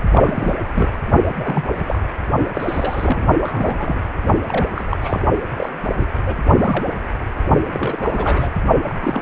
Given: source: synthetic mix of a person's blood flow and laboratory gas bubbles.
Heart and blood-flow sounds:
Doppler ultrasound of blood flow; precordium
0.12-0.54 s: bubbles
0.75-0.89 s: bubbles
1.39-1.65 s: bubbles
1.77-1.98 s: bubbles
2.54-3.27 s: bubbles
3.40-4.05 s: bubbles
4.48-4.65 s: bubbles
4.73-4.85 s: bubbles
4.91-4.96 s: bubbles
5.02-5.20 s: bubbles
5.56-5.70 s: bubbles
6.00-6.06 s: bubbles
6.26-6.35 s: bubbles
6.57-6.88 s: bubbles
7.73-8.49 s: bubbles
8.82-9.22 s: bubbles
From the record:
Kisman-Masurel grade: 242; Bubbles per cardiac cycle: several, 3 to 8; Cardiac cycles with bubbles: 100%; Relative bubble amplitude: moderate (0.250 to 0.450); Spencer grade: 3 (all of the cardiac periods contain showers or single bubble signals, but not dominating or overriding the cardiac motion signals); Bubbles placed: only in the low amplitude regions of the cardiac cycle

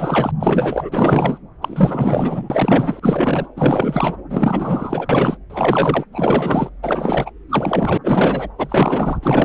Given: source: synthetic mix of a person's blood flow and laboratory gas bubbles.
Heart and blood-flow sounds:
Doppler ultrasound of blood flow; subclavian vein
0.00-0.32 s: bubbles
0.39-0.89 s: bubbles
0.92-1.38 s: bubbles
1.61-3.47 s: bubbles
3.56-4.17 s: bubbles
4.29-5.37 s: bubbles
5.50-6.04 s: bubbles
6.12-6.69 s: bubbles
6.83-7.30 s: bubbles
7.49-7.98 s: bubbles
8.04-8.49 s: bubbles
8.58-9.19 s: bubbles
9.22-9.45 s: bubbles
From the record:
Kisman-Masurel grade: 444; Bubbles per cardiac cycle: continuous sound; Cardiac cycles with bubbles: 100%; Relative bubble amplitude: maximal (0.775 to 0.999); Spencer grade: 4 (maximum detectable bubble signal sounding continuously throughout systole and diastole of every cardiac period, and overriding the amplitude of the normal cardiac signals); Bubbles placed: anywhere in the cardiac cycle

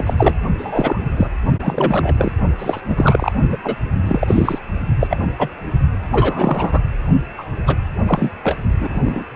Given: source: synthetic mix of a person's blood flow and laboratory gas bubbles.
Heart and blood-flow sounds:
Doppler ultrasound of blood flow; precordium
0.00-0.14 s: bubbles
0.16-0.35 s: bubbles
0.58-1.30 s: bubbles
1.62-2.15 s: bubbles
2.18-2.32 s: bubbles
2.58-2.81 s: bubbles
2.88-3.32 s: bubbles
3.49-3.58 s: bubbles
3.63-3.76 s: bubbles
4.02-4.58 s: bubbles
4.99-5.07 s: bubbles
5.10-5.17 s: bubbles
5.38-5.49 s: bubbles
6.11-6.80 s: bubbles
7.38-7.43 s: bubbles
7.66-7.76 s: bubbles
8.06-8.30 s: bubbles
8.44-8.56 s: bubbles
8.80-9.25 s: bubbles
From the record:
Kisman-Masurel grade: 243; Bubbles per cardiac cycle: several, 3 to 8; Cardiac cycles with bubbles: 100%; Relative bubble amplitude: loud (0.450 to 0.775); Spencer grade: 3 (all of the cardiac periods contain showers or single bubble signals, but not dominating or overriding the cardiac motion signals); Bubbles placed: only in the low amplitude regions of the cardiac cycle

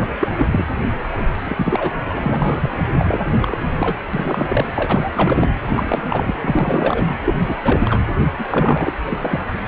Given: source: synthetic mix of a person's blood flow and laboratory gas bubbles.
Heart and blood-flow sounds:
Doppler ultrasound of blood flow; precordium
0.00-0.28 s: bubbles
0.39-0.64 s: bubbles
1.43-1.91 s: bubbles
2.08-2.71 s: bubbles
2.98-3.19 s: bubbles
3.24-3.58 s: bubbles
3.79-3.96 s: bubbles
4.13-4.68 s: bubbles
4.75-5.49 s: bubbles
5.65-6.07 s: bubbles
6.10-6.34 s: bubbles
6.40-7.18 s: bubbles
7.23-8.02 s: bubbles
8.38-8.94 s: bubbles
9.04-9.41 s: bubbles
9.66-9.68 s: bubbles
From the record:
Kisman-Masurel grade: 343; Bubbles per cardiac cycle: rolling drumbeat, 9 or more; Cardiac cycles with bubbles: 100%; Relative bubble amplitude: loud (0.450 to 0.775); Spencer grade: 3 (all of the cardiac periods contain showers or single bubble signals, but not dominating or overriding the cardiac motion signals); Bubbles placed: anywhere in the cardiac cycle

